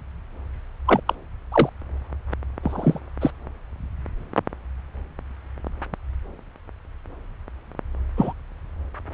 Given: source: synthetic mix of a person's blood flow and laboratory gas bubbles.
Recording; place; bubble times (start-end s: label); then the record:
Doppler ultrasound of blood flow; subclavian vein
0.86-1.00 s: bubbles
1.06-1.15 s: bubbles
1.52-1.69 s: bubbles
2.63-2.99 s: bubbles
3.21-3.31 s: bubbles
8.17-8.33 s: bubbles
From the record:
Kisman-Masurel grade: 122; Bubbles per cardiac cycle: 1 to 2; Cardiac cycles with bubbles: 10 to 50%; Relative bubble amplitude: moderate (0.250 to 0.450); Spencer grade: 2 (many but less than half of the cardiac periods contain bubble signals, singularly or in groups); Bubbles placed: anywhere in the cardiac cycle